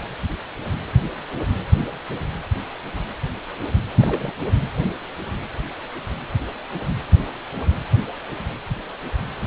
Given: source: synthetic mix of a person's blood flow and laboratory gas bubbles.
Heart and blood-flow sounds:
Doppler ultrasound of blood flow; precordium
4.01-4.33 s: bubbles
From the record:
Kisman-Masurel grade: 211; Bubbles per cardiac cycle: several, 3 to 8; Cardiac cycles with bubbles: 1 to 10%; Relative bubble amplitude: barely perceptible (0.100 to 0.250); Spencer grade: 1 (occasional bubble signal discernible with the cardiac motion signal, with majority of cardiac periods free of bubbles); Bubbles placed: anywhere in the cardiac cycle

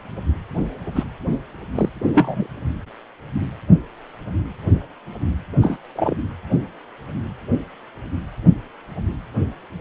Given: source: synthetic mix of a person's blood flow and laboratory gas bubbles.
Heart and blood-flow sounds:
Doppler ultrasound of blood flow; precordium
0.95-1.03 s: bubbles
1.75-1.89 s: bubbles
2.13-2.46 s: bubbles
5.61-5.77 s: bubbles
5.96-6.15 s: bubbles
From the record:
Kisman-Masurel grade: 123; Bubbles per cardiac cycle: 1 to 2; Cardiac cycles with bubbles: 10 to 50%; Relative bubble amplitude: loud (0.450 to 0.775); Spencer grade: 2 (many but less than half of the cardiac periods contain bubble signals, singularly or in groups); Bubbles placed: anywhere in the cardiac cycle

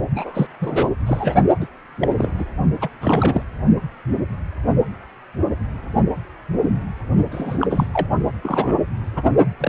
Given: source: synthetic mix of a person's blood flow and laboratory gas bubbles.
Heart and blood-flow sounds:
Doppler ultrasound of blood flow; precordium
0.15-0.46 s: bubbles
0.60-0.90 s: bubbles
1.06-1.34 s: bubbles
1.60-1.67 s: bubbles
2.00-2.30 s: bubbles
2.38-2.45 s: bubbles
2.81-2.89 s: bubbles
3.01-3.43 s: bubbles
7.31-7.67 s: bubbles
7.70-7.88 s: bubbles
7.93-8.07 s: bubbles
8.43-8.75 s: bubbles
9.15-9.30 s: bubbles
9.59-9.69 s: bubbles
From the record:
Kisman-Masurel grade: 232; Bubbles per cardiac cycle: several, 3 to 8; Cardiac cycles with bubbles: 50 to 99%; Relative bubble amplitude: moderate (0.250 to 0.450); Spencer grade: 3 (all of the cardiac periods contain showers or single bubble signals, but not dominating or overriding the cardiac motion signals); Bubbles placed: only in the low amplitude regions of the cardiac cycle

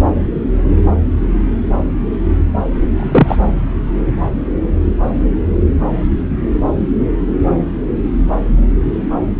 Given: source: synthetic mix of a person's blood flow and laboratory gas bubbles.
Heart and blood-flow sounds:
Doppler ultrasound of blood flow; subclavian vein
2.96-3.36 s: bubbles
From the record:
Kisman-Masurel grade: 113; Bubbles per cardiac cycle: 1 to 2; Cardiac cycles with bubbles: 1 to 10%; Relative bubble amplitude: loud (0.450 to 0.775); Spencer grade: 1 (occasional bubble signal discernible with the cardiac motion signal, with majority of cardiac periods free of bubbles); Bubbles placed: anywhere in the cardiac cycle

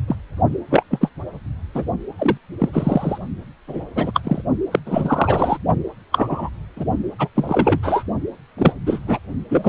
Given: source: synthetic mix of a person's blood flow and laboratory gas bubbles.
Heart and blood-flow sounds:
Doppler ultrasound of blood flow; precordium
0.08-0.15 s: bubbles
0.70-0.83 s: bubbles
0.91-1.09 s: bubbles
1.74-1.84 s: bubbles
2.18-2.38 s: bubbles
2.59-2.69 s: bubbles
2.72-3.18 s: bubbles
3.67-3.85 s: bubbles
3.95-4.21 s: bubbles
4.24-4.42 s: bubbles
4.71-4.79 s: bubbles
4.86-5.58 s: bubbles
6.12-6.50 s: bubbles
6.76-6.85 s: bubbles
7.19-7.28 s: bubbles
7.35-7.80 s: bubbles
7.83-8.04 s: bubbles
8.58-8.73 s: bubbles
8.86-9.00 s: bubbles
9.06-9.19 s: bubbles
9.49-9.69 s: bubbles
From the record:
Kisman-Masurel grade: 243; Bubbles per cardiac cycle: several, 3 to 8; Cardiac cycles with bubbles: 100%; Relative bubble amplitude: loud (0.450 to 0.775); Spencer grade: 3 (all of the cardiac periods contain showers or single bubble signals, but not dominating or overriding the cardiac motion signals); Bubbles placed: only in the low amplitude regions of the cardiac cycle

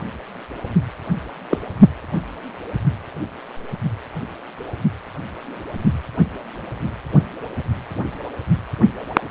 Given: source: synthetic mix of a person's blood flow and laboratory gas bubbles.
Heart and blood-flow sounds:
Doppler ultrasound of blood flow; precordium
1.50-1.58 s: bubbles
From the record:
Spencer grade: 1 (occasional bubble signal discernible with the cardiac motion signal, with majority of cardiac periods free of bubbles); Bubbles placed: anywhere in the cardiac cycle

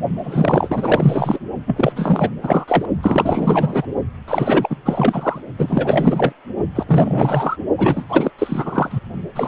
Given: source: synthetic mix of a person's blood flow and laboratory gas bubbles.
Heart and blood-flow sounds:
Doppler ultrasound of blood flow; precordium
0.24-1.39 s: bubbles
1.67-1.92 s: bubbles
1.96-2.30 s: bubbles
2.42-2.65 s: bubbles
2.67-2.85 s: bubbles
3.02-3.86 s: bubbles
4.28-4.77 s: bubbles
4.85-5.41 s: bubbles
5.59-6.32 s: bubbles
6.75-7.57 s: bubbles
7.78-8.04 s: bubbles
8.09-8.31 s: bubbles
8.38-9.00 s: bubbles
9.35-9.48 s: bubbles
From the record:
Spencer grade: 4 (maximum detectable bubble signal sounding continuously throughout systole and diastole of every cardiac period, and overriding the amplitude of the normal cardiac signals); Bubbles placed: only in the low amplitude regions of the cardiac cycle

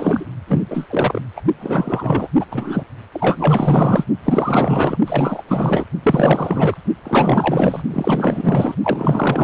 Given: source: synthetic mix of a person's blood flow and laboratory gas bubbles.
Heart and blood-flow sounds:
Doppler ultrasound of blood flow; precordium
0.00-0.26 s: bubbles
0.47-0.62 s: bubbles
0.70-0.86 s: bubbles
0.90-1.21 s: bubbles
1.36-1.41 s: bubbles
1.59-2.28 s: bubbles
2.39-2.46 s: bubbles
2.51-2.84 s: bubbles
3.12-4.05 s: bubbles
4.25-4.97 s: bubbles
5.05-5.42 s: bubbles
5.47-5.85 s: bubbles
6.03-6.78 s: bubbles
7.04-7.83 s: bubbles
7.91-8.76 s: bubbles
8.83-9.44 s: bubbles
From the record:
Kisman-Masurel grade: 444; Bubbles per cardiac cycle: continuous sound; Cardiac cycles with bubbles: 100%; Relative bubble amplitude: maximal (0.775 to 0.999); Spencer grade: 4 (maximum detectable bubble signal sounding continuously throughout systole and diastole of every cardiac period, and overriding the amplitude of the normal cardiac signals); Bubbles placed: only in the low amplitude regions of the cardiac cycle

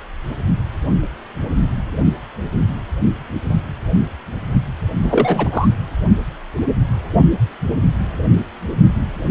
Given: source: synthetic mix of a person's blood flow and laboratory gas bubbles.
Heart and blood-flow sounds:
Doppler ultrasound of blood flow; precordium
5.03-5.49 s: bubbles
5.51-5.68 s: bubbles
From the record:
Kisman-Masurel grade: 223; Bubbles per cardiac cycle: several, 3 to 8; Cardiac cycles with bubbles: 10 to 50%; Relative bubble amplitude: loud (0.450 to 0.775); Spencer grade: 2 (many but less than half of the cardiac periods contain bubble signals, singularly or in groups); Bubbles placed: only in the low amplitude regions of the cardiac cycle

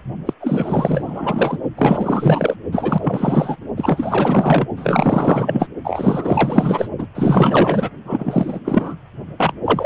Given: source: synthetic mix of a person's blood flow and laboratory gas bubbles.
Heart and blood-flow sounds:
Doppler ultrasound of blood flow; precordium
0.26-0.33 s: bubbles
0.40-1.58 s: bubbles
1.77-2.56 s: bubbles
2.72-3.57 s: bubbles
3.77-4.67 s: bubbles
4.77-5.68 s: bubbles
5.83-6.88 s: bubbles
6.98-7.07 s: bubbles
7.15-7.90 s: bubbles
8.04-8.60 s: bubbles
8.64-8.95 s: bubbles
9.38-9.53 s: bubbles
9.64-9.86 s: bubbles
From the record:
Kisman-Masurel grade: 444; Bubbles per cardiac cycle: continuous sound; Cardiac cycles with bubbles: 100%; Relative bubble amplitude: maximal (0.775 to 0.999); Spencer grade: 4 (maximum detectable bubble signal sounding continuously throughout systole and diastole of every cardiac period, and overriding the amplitude of the normal cardiac signals); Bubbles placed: only in the low amplitude regions of the cardiac cycle

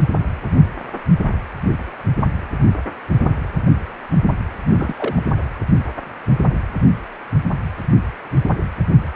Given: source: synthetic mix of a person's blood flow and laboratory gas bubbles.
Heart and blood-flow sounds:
Doppler ultrasound of blood flow; precordium
4.65-5.22 s: bubbles
From the record:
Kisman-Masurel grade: 222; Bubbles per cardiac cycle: several, 3 to 8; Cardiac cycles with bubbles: 10 to 50%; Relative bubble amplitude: moderate (0.250 to 0.450); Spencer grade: 2 (many but less than half of the cardiac periods contain bubble signals, singularly or in groups); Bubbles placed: anywhere in the cardiac cycle

